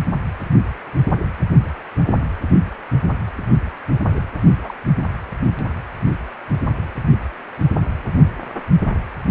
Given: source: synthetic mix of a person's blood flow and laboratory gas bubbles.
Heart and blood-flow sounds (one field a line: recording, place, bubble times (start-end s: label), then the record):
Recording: Doppler ultrasound of blood flow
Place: precordium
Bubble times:
4.12-4.22 s: bubbles
4.46-4.58 s: bubbles
4.61-4.74 s: bubbles
From the record:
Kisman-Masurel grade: 221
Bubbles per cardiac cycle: several, 3 to 8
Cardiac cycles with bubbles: 10 to 50%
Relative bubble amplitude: barely perceptible (0.100 to 0.250)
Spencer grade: 2 (many but less than half of the cardiac periods contain bubble signals, singularly or in groups)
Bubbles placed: only in the low amplitude regions of the cardiac cycle